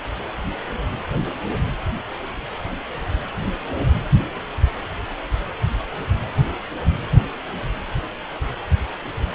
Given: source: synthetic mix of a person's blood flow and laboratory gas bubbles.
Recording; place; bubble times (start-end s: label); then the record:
Doppler ultrasound of blood flow; precordium
no bubbles
From the record:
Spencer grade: 0 (complete lack of bubble signals)